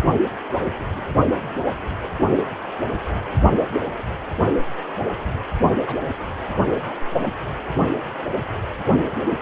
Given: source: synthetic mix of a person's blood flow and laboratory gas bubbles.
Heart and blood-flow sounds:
Doppler ultrasound of blood flow; precordium
5.87-5.96 s: bubbles
From the record:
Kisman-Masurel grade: 111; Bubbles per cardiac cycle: 1 to 2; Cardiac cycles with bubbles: 1 to 10%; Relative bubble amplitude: barely perceptible (0.100 to 0.250); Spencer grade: 1 (occasional bubble signal discernible with the cardiac motion signal, with majority of cardiac periods free of bubbles); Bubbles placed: only in the low amplitude regions of the cardiac cycle

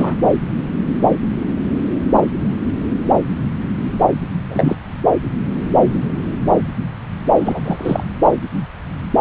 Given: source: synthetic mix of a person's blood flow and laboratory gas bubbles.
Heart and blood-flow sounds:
Doppler ultrasound of blood flow; subclavian vein
0.00-0.15 s: bubbles
4.50-4.76 s: bubbles
7.38-7.61 s: bubbles
7.65-8.04 s: bubbles
From the record:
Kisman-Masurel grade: 222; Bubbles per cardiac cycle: several, 3 to 8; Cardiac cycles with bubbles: 10 to 50%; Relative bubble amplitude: moderate (0.250 to 0.450); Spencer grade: 2 (many but less than half of the cardiac periods contain bubble signals, singularly or in groups); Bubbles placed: anywhere in the cardiac cycle

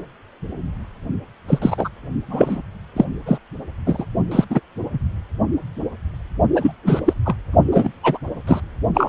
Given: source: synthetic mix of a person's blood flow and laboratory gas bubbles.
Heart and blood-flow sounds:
Doppler ultrasound of blood flow; precordium
1.48-1.59 s: bubbles
1.62-1.89 s: bubbles
2.28-2.62 s: bubbles
2.96-3.04 s: bubbles
3.26-3.38 s: bubbles
3.86-4.05 s: bubbles
4.31-4.44 s: bubbles
4.49-4.60 s: bubbles
4.92-4.99 s: bubbles
6.54-6.72 s: bubbles
6.85-7.00 s: bubbles
7.05-7.13 s: bubbles
7.25-7.35 s: bubbles
7.71-7.92 s: bubbles
8.03-8.18 s: bubbles
8.47-8.60 s: bubbles
8.94-9.09 s: bubbles
From the record:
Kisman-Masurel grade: 233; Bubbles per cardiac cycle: several, 3 to 8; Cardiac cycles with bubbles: 50 to 99%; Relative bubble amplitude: loud (0.450 to 0.775); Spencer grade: 3 (all of the cardiac periods contain showers or single bubble signals, but not dominating or overriding the cardiac motion signals); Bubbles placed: only in the low amplitude regions of the cardiac cycle

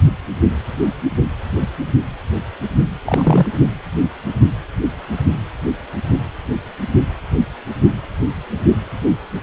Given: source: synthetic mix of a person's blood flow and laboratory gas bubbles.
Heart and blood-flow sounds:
Doppler ultrasound of blood flow; precordium
3.04-3.46 s: bubbles
From the record:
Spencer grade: 1 (occasional bubble signal discernible with the cardiac motion signal, with majority of cardiac periods free of bubbles); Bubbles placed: only in the low amplitude regions of the cardiac cycle

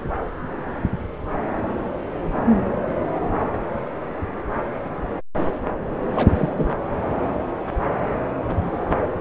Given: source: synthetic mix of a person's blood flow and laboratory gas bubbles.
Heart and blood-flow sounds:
Doppler ultrasound of blood flow; subclavian vein
6.13-6.32 s: bubbles
6.35-6.75 s: bubbles
8.61-8.71 s: bubbles
From the record:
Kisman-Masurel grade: 222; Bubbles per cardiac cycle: several, 3 to 8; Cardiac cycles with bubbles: 10 to 50%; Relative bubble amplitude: moderate (0.250 to 0.450); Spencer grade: 2 (many but less than half of the cardiac periods contain bubble signals, singularly or in groups); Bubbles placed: anywhere in the cardiac cycle

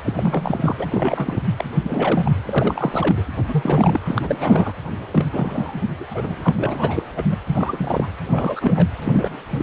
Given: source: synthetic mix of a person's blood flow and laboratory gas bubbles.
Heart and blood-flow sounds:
Doppler ultrasound of blood flow; precordium
0.05-0.13 s: bubbles
0.16-0.73 s: bubbles
0.77-1.43 s: bubbles
1.56-1.65 s: bubbles
1.83-2.31 s: bubbles
2.45-3.22 s: bubbles
3.48-4.00 s: bubbles
4.06-4.73 s: bubbles
5.12-5.82 s: bubbles
6.00-6.33 s: bubbles
6.40-7.04 s: bubbles
7.16-7.25 s: bubbles
7.31-7.39 s: bubbles
7.46-8.07 s: bubbles
8.30-8.88 s: bubbles
9.04-9.44 s: bubbles
9.50-9.63 s: bubbles
From the record:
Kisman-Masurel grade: 332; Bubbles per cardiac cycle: rolling drumbeat, 9 or more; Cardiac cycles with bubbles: 50 to 99%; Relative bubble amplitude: moderate (0.250 to 0.450); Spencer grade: 3 (all of the cardiac periods contain showers or single bubble signals, but not dominating or overriding the cardiac motion signals); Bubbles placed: anywhere in the cardiac cycle

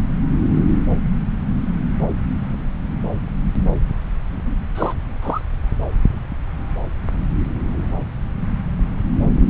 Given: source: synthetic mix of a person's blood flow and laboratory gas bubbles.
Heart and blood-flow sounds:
Doppler ultrasound of blood flow; subclavian vein
4.74-4.94 s: bubbles
5.21-5.41 s: bubbles
From the record:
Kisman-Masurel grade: 212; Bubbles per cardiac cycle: several, 3 to 8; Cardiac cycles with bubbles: 1 to 10%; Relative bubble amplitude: moderate (0.250 to 0.450); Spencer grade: 1 (occasional bubble signal discernible with the cardiac motion signal, with majority of cardiac periods free of bubbles); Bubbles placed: anywhere in the cardiac cycle

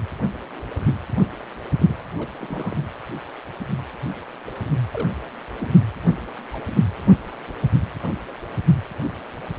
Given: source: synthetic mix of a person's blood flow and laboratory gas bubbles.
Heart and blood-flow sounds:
Doppler ultrasound of blood flow; precordium
1.20-1.25 s: bubbles
1.76-1.97 s: bubbles
2.18-2.28 s: bubbles
2.39-2.78 s: bubbles
4.92-5.12 s: bubbles
5.59-5.67 s: bubbles
6.10-6.17 s: bubbles
6.52-6.61 s: bubbles
From the record:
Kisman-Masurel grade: 121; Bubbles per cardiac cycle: 1 to 2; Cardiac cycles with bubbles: 10 to 50%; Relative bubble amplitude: barely perceptible (0.100 to 0.250); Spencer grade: 2 (many but less than half of the cardiac periods contain bubble signals, singularly or in groups); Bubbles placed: anywhere in the cardiac cycle

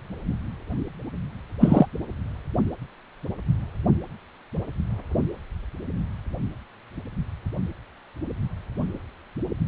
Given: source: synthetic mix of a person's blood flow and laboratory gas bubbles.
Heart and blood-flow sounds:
Doppler ultrasound of blood flow; precordium
1.60-1.86 s: bubbles
From the record:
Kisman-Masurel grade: 123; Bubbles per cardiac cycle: 1 to 2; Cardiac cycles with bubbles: 10 to 50%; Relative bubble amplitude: loud (0.450 to 0.775); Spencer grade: 2 (many but less than half of the cardiac periods contain bubble signals, singularly or in groups); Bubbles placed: anywhere in the cardiac cycle

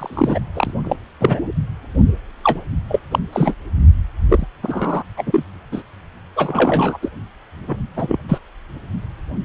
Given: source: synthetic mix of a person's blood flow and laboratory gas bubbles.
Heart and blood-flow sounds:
Doppler ultrasound of blood flow; precordium
0.00-0.39 s: bubbles
0.54-0.71 s: bubbles
0.84-0.96 s: bubbles
1.21-1.51 s: bubbles
2.43-2.60 s: bubbles
2.88-2.99 s: bubbles
3.11-3.19 s: bubbles
3.32-3.55 s: bubbles
4.29-4.46 s: bubbles
4.62-5.03 s: bubbles
5.17-5.44 s: bubbles
5.71-5.83 s: bubbles
6.36-6.98 s: bubbles
7.02-7.09 s: bubbles
7.67-7.77 s: bubbles
7.96-8.17 s: bubbles
8.28-8.38 s: bubbles
From the record:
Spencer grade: 3 (all of the cardiac periods contain showers or single bubble signals, but not dominating or overriding the cardiac motion signals); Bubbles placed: only in the low amplitude regions of the cardiac cycle

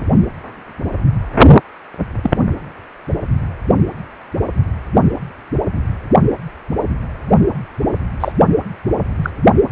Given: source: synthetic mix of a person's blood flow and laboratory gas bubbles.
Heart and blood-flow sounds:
Doppler ultrasound of blood flow; precordium
2.23-2.31 s: bubbles
8.20-8.32 s: bubbles
9.22-9.30 s: bubbles
From the record:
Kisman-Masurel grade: 123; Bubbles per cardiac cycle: 1 to 2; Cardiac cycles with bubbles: 10 to 50%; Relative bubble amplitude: loud (0.450 to 0.775); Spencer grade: 2 (many but less than half of the cardiac periods contain bubble signals, singularly or in groups); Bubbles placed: only in the low amplitude regions of the cardiac cycle

